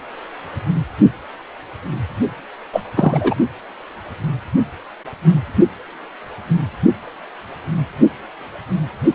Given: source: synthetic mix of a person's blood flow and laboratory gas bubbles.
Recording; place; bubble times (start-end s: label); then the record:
Doppler ultrasound of blood flow; precordium
2.73-2.85 s: bubbles
2.96-3.35 s: bubbles
From the record:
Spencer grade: 1 (occasional bubble signal discernible with the cardiac motion signal, with majority of cardiac periods free of bubbles); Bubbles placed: only in the low amplitude regions of the cardiac cycle